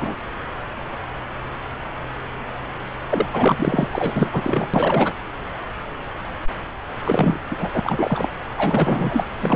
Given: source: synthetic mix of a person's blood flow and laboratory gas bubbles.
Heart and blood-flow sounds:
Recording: Doppler ultrasound of blood flow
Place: subclavian vein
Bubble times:
0.00-0.15 s: bubbles
3.09-3.27 s: bubbles
3.32-3.88 s: bubbles
3.93-4.67 s: bubbles
4.74-5.14 s: bubbles
7.04-7.40 s: bubbles
7.50-7.56 s: bubbles
7.59-7.80 s: bubbles
7.83-8.29 s: bubbles
8.55-9.28 s: bubbles
9.40-9.56 s: bubbles
From the record:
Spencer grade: 3 (all of the cardiac periods contain showers or single bubble signals, but not dominating or overriding the cardiac motion signals)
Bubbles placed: anywhere in the cardiac cycle

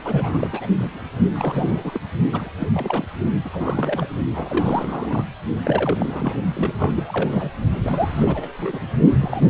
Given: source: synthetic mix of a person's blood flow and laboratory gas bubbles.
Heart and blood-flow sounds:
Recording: Doppler ultrasound of blood flow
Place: precordium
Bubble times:
0.04-0.48 s: bubbles
0.52-0.67 s: bubbles
0.79-1.00 s: bubbles
1.34-2.00 s: bubbles
2.32-2.49 s: bubbles
2.59-2.68 s: bubbles
2.73-3.04 s: bubbles
3.44-3.49 s: bubbles
3.52-4.08 s: bubbles
4.34-5.25 s: bubbles
5.64-6.44 s: bubbles
6.56-6.74 s: bubbles
6.78-7.51 s: bubbles
7.83-8.48 s: bubbles
8.58-8.79 s: bubbles
9.19-9.50 s: bubbles
From the record:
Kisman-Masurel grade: 342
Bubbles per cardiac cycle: rolling drumbeat, 9 or more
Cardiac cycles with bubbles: 100%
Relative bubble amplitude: moderate (0.250 to 0.450)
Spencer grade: 3 (all of the cardiac periods contain showers or single bubble signals, but not dominating or overriding the cardiac motion signals)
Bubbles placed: only in the low amplitude regions of the cardiac cycle

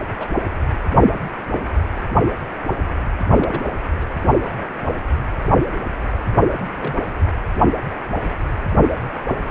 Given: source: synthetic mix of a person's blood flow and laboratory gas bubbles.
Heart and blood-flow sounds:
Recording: Doppler ultrasound of blood flow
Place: precordium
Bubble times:
0.20-0.28 s: bubbles
3.39-3.62 s: bubbles
4.00-4.05 s: bubbles
4.42-4.69 s: bubbles
6.78-6.94 s: bubbles
From the record:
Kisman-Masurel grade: 121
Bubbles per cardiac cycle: 1 to 2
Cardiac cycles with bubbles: 10 to 50%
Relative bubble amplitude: barely perceptible (0.100 to 0.250)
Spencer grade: 2 (many but less than half of the cardiac periods contain bubble signals, singularly or in groups)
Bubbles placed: anywhere in the cardiac cycle

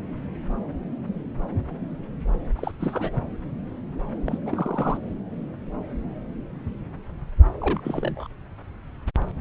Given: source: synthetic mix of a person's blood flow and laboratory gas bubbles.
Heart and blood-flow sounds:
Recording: Doppler ultrasound of blood flow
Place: subclavian vein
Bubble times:
2.56-2.71 s: bubbles
2.80-3.27 s: bubbles
4.25-4.39 s: bubbles
4.46-5.00 s: bubbles
7.60-8.27 s: bubbles
From the record:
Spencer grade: 2 (many but less than half of the cardiac periods contain bubble signals, singularly or in groups)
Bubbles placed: anywhere in the cardiac cycle

